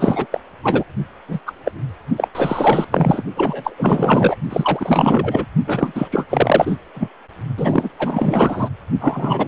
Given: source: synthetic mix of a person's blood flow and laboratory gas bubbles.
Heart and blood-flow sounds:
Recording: Doppler ultrasound of blood flow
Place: precordium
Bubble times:
0.00-0.27 s: bubbles
0.32-0.40 s: bubbles
0.63-0.84 s: bubbles
1.28-1.40 s: bubbles
1.46-1.52 s: bubbles
1.65-1.71 s: bubbles
2.16-2.28 s: bubbles
2.35-2.88 s: bubbles
2.91-3.23 s: bubbles
3.35-3.75 s: bubbles
3.77-4.36 s: bubbles
4.50-5.46 s: bubbles
5.67-6.08 s: bubbles
6.11-6.26 s: bubbles
6.29-6.77 s: bubbles
6.94-7.08 s: bubbles
7.57-7.89 s: bubbles
7.98-8.70 s: bubbles
9.00-9.48 s: bubbles
From the record:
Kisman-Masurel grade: 444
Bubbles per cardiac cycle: continuous sound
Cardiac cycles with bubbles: 100%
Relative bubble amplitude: maximal (0.775 to 0.999)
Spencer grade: 4 (maximum detectable bubble signal sounding continuously throughout systole and diastole of every cardiac period, and overriding the amplitude of the normal cardiac signals)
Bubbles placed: only in the low amplitude regions of the cardiac cycle

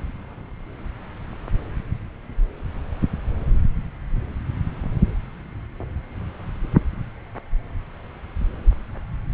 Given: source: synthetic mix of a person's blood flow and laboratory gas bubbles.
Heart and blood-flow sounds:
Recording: Doppler ultrasound of blood flow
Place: subclavian vein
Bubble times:
no bubbles
From the record:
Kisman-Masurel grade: 000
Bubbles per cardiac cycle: 0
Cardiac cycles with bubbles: 0%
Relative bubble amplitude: no bubbles discernible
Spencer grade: 0 (complete lack of bubble signals)

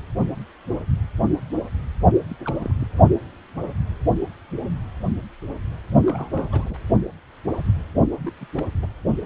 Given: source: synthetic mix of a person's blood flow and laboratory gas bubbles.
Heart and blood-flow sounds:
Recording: Doppler ultrasound of blood flow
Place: precordium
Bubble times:
2.29-2.35 s: bubbles
2.43-2.75 s: bubbles
2.80-2.87 s: bubbles
6.05-6.75 s: bubbles
8.20-8.32 s: bubbles
8.41-8.45 s: bubbles
8.57-8.64 s: bubbles
8.83-8.87 s: bubbles
From the record:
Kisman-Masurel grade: 221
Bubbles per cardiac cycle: several, 3 to 8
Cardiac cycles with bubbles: 10 to 50%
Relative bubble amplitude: barely perceptible (0.100 to 0.250)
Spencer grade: 2 (many but less than half of the cardiac periods contain bubble signals, singularly or in groups)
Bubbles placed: only in the low amplitude regions of the cardiac cycle

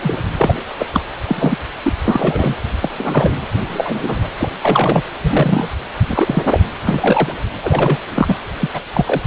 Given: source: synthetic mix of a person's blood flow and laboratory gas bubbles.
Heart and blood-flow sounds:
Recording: Doppler ultrasound of blood flow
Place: precordium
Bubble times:
0.02-0.17 s: bubbles
0.29-0.64 s: bubbles
0.79-0.87 s: bubbles
0.93-1.02 s: bubbles
1.27-1.58 s: bubbles
1.83-1.93 s: bubbles
2.06-2.54 s: bubbles
2.82-3.31 s: bubbles
3.69-4.27 s: bubbles
4.38-4.50 s: bubbles
4.61-5.02 s: bubbles
5.21-5.68 s: bubbles
6.07-6.60 s: bubbles
6.85-7.33 s: bubbles
7.60-7.99 s: bubbles
8.15-8.35 s: bubbles
8.60-8.70 s: bubbles
8.74-8.80 s: bubbles
8.94-9.21 s: bubbles
From the record:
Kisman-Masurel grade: 243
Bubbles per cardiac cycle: several, 3 to 8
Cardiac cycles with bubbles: 100%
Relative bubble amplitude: loud (0.450 to 0.775)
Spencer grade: 3 (all of the cardiac periods contain showers or single bubble signals, but not dominating or overriding the cardiac motion signals)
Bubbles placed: anywhere in the cardiac cycle

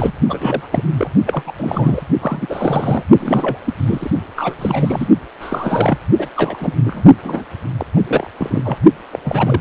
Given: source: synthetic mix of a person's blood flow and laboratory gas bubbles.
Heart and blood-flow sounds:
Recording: Doppler ultrasound of blood flow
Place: precordium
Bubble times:
0.00-0.12 s: bubbles
0.29-0.68 s: bubbles
0.71-0.84 s: bubbles
0.97-1.10 s: bubbles
1.26-1.52 s: bubbles
1.57-2.02 s: bubbles
2.21-2.46 s: bubbles
2.49-3.03 s: bubbles
3.19-3.73 s: bubbles
3.80-4.10 s: bubbles
4.35-4.55 s: bubbles
4.59-5.08 s: bubbles
5.40-5.98 s: bubbles
6.18-6.28 s: bubbles
6.36-6.57 s: bubbles
6.60-6.74 s: bubbles
6.85-7.02 s: bubbles
7.23-7.44 s: bubbles
7.77-7.86 s: bubbles
7.96-8.01 s: bubbles
8.07-8.27 s: bubbles
8.37-8.78 s: bubbles
9.12-9.20 s: bubbles
9.24-9.61 s: bubbles
From the record:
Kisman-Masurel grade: 342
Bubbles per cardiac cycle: rolling drumbeat, 9 or more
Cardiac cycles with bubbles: 100%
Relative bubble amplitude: moderate (0.250 to 0.450)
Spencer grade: 3 (all of the cardiac periods contain showers or single bubble signals, but not dominating or overriding the cardiac motion signals)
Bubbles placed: only in the low amplitude regions of the cardiac cycle

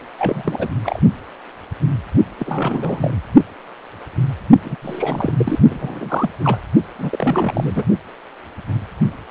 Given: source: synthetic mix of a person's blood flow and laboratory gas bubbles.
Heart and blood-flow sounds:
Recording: Doppler ultrasound of blood flow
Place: precordium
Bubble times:
0.16-0.69 s: bubbles
0.82-0.99 s: bubbles
2.39-3.14 s: bubbles
4.64-4.76 s: bubbles
4.81-5.31 s: bubbles
5.38-5.59 s: bubbles
5.69-6.30 s: bubbles
6.44-6.58 s: bubbles
6.98-7.83 s: bubbles
From the record:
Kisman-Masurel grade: 332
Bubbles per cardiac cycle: rolling drumbeat, 9 or more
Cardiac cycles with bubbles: 50 to 99%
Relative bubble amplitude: moderate (0.250 to 0.450)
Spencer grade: 3 (all of the cardiac periods contain showers or single bubble signals, but not dominating or overriding the cardiac motion signals)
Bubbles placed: only in the low amplitude regions of the cardiac cycle

